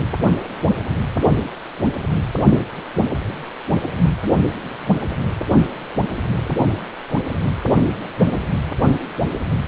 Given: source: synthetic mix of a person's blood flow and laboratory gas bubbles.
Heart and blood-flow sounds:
Doppler ultrasound of blood flow; precordium
no bubbles
From the record:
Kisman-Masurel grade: 000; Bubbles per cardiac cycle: 0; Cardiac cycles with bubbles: 0%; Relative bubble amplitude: no bubbles discernible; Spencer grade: 0 (complete lack of bubble signals)

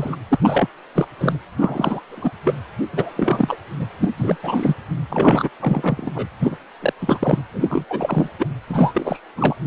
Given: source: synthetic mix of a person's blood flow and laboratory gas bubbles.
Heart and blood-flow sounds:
Doppler ultrasound of blood flow; precordium
0.00-0.16 s: bubbles
0.28-0.36 s: bubbles
0.42-0.69 s: bubbles
0.95-1.07 s: bubbles
1.19-1.36 s: bubbles
1.56-2.01 s: bubbles
2.08-2.31 s: bubbles
2.45-2.56 s: bubbles
2.92-3.57 s: bubbles
3.79-3.86 s: bubbles
4.00-4.12 s: bubbles
4.17-4.37 s: bubbles
4.42-4.75 s: bubbles
5.09-5.50 s: bubbles
5.60-6.12 s: bubbles
6.14-6.28 s: bubbles
6.39-6.58 s: bubbles
6.80-6.93 s: bubbles
6.99-7.42 s: bubbles
7.54-7.84 s: bubbles
7.89-8.29 s: bubbles
8.38-8.47 s: bubbles
8.67-9.21 s: bubbles
9.36-9.56 s: bubbles
From the record:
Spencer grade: 3 (all of the cardiac periods contain showers or single bubble signals, but not dominating or overriding the cardiac motion signals); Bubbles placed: anywhere in the cardiac cycle

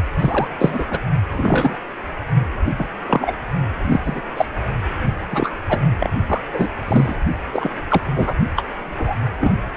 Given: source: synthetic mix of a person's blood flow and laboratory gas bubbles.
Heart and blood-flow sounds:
Doppler ultrasound of blood flow; precordium
0.18-0.49 s: bubbles
0.57-0.86 s: bubbles
0.89-0.98 s: bubbles
1.29-1.76 s: bubbles
2.79-2.87 s: bubbles
3.06-3.37 s: bubbles
3.84-4.01 s: bubbles
4.04-4.22 s: bubbles
4.37-4.46 s: bubbles
5.31-5.52 s: bubbles
5.69-5.79 s: bubbles
6.00-6.10 s: bubbles
6.27-6.41 s: bubbles
6.53-6.70 s: bubbles
6.88-7.16 s: bubbles
7.53-7.70 s: bubbles
7.89-8.02 s: bubbles
8.15-8.35 s: bubbles
8.56-8.64 s: bubbles
8.96-9.15 s: bubbles
9.40-9.52 s: bubbles
From the record:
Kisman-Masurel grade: 243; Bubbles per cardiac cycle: several, 3 to 8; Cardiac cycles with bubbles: 100%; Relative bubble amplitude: loud (0.450 to 0.775); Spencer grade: 3 (all of the cardiac periods contain showers or single bubble signals, but not dominating or overriding the cardiac motion signals); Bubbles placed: only in the low amplitude regions of the cardiac cycle

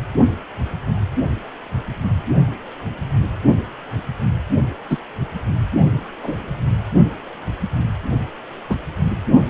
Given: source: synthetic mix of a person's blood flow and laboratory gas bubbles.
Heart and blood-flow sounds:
Doppler ultrasound of blood flow; precordium
4.90-4.98 s: bubbles
6.23-6.35 s: bubbles
8.70-8.76 s: bubbles
From the record:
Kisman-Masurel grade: 123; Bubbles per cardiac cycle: 1 to 2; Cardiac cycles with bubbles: 10 to 50%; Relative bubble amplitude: loud (0.450 to 0.775); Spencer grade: 2 (many but less than half of the cardiac periods contain bubble signals, singularly or in groups); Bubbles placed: only in the low amplitude regions of the cardiac cycle

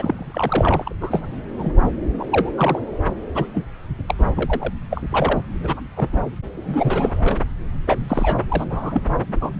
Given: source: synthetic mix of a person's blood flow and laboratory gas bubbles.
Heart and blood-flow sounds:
Doppler ultrasound of blood flow; subclavian vein
0.00-0.93 s: bubbles
1.00-1.27 s: bubbles
1.58-1.71 s: bubbles
1.79-1.90 s: bubbles
2.18-2.25 s: bubbles
2.30-2.49 s: bubbles
2.56-2.80 s: bubbles
3.34-3.48 s: bubbles
3.54-3.65 s: bubbles
4.08-4.15 s: bubbles
4.18-4.29 s: bubbles
4.37-4.73 s: bubbles
4.91-5.02 s: bubbles
5.11-5.40 s: bubbles
5.63-5.81 s: bubbles
5.97-6.10 s: bubbles
6.12-6.21 s: bubbles
6.53-7.36 s: bubbles
7.86-8.45 s: bubbles
8.48-8.65 s: bubbles
8.70-9.01 s: bubbles
9.41-9.50 s: bubbles
From the record:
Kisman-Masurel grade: 242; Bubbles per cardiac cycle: several, 3 to 8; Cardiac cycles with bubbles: 100%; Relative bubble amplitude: moderate (0.250 to 0.450); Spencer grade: 3 (all of the cardiac periods contain showers or single bubble signals, but not dominating or overriding the cardiac motion signals); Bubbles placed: anywhere in the cardiac cycle

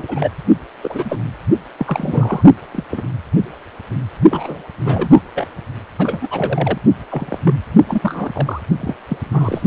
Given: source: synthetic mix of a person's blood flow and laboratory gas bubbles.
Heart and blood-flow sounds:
Doppler ultrasound of blood flow; precordium
0.00-0.30 s: bubbles
0.83-1.18 s: bubbles
1.77-2.42 s: bubbles
2.73-2.83 s: bubbles
2.90-3.02 s: bubbles
4.31-4.62 s: bubbles
4.85-5.20 s: bubbles
5.35-5.48 s: bubbles
5.99-6.79 s: bubbles
7.10-7.39 s: bubbles
7.45-7.54 s: bubbles
7.88-8.29 s: bubbles
8.33-8.61 s: bubbles
8.79-8.96 s: bubbles
9.09-9.18 s: bubbles
9.32-9.62 s: bubbles
From the record:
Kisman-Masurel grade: 242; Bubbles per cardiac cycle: several, 3 to 8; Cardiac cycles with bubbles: 100%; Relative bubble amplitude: moderate (0.250 to 0.450); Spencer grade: 3 (all of the cardiac periods contain showers or single bubble signals, but not dominating or overriding the cardiac motion signals); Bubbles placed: only in the low amplitude regions of the cardiac cycle

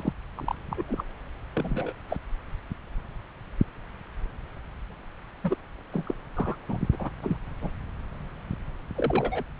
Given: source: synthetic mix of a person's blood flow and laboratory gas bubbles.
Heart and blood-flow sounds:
Doppler ultrasound of blood flow; subclavian vein
0.00-0.12 s: bubbles
0.36-0.55 s: bubbles
0.70-0.83 s: bubbles
0.88-1.04 s: bubbles
1.55-1.93 s: bubbles
2.08-2.17 s: bubbles
5.43-5.56 s: bubbles
5.92-6.14 s: bubbles
6.35-6.55 s: bubbles
6.68-6.77 s: bubbles
6.92-7.10 s: bubbles
7.22-7.36 s: bubbles
7.61-7.70 s: bubbles
8.95-9.43 s: bubbles
From the record:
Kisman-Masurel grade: 232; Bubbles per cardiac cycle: several, 3 to 8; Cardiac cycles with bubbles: 50 to 99%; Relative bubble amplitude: moderate (0.250 to 0.450); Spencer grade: 3 (all of the cardiac periods contain showers or single bubble signals, but not dominating or overriding the cardiac motion signals); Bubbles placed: anywhere in the cardiac cycle

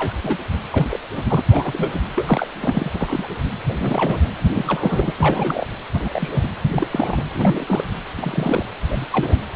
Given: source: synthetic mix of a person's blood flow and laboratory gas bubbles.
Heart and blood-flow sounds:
Doppler ultrasound of blood flow; precordium
0.00-0.14 s: bubbles
0.22-0.37 s: bubbles
0.72-0.88 s: bubbles
0.90-1.00 s: bubbles
1.18-1.42 s: bubbles
1.50-2.01 s: bubbles
2.16-2.48 s: bubbles
2.55-3.27 s: bubbles
3.69-3.73 s: bubbles
3.77-4.30 s: bubbles
4.52-5.13 s: bubbles
5.18-5.65 s: bubbles
5.93-6.48 s: bubbles
6.66-6.88 s: bubbles
6.91-7.22 s: bubbles
7.32-7.84 s: bubbles
8.17-8.66 s: bubbles
8.86-9.05 s: bubbles
9.12-9.36 s: bubbles
From the record:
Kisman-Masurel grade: 242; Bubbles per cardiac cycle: several, 3 to 8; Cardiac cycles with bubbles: 100%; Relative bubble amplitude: moderate (0.250 to 0.450); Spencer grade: 3 (all of the cardiac periods contain showers or single bubble signals, but not dominating or overriding the cardiac motion signals); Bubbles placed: anywhere in the cardiac cycle

